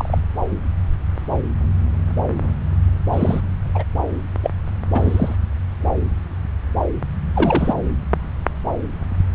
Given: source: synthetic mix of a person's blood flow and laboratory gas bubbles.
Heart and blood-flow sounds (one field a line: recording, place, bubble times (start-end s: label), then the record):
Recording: Doppler ultrasound of blood flow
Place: subclavian vein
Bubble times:
0.00-0.18 s: bubbles
3.12-3.40 s: bubbles
3.74-3.83 s: bubbles
4.43-4.51 s: bubbles
4.93-5.36 s: bubbles
7.33-7.74 s: bubbles
From the record:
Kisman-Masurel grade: 123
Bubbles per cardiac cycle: 1 to 2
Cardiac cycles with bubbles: 10 to 50%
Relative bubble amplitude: loud (0.450 to 0.775)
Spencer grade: 2 (many but less than half of the cardiac periods contain bubble signals, singularly or in groups)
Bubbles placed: anywhere in the cardiac cycle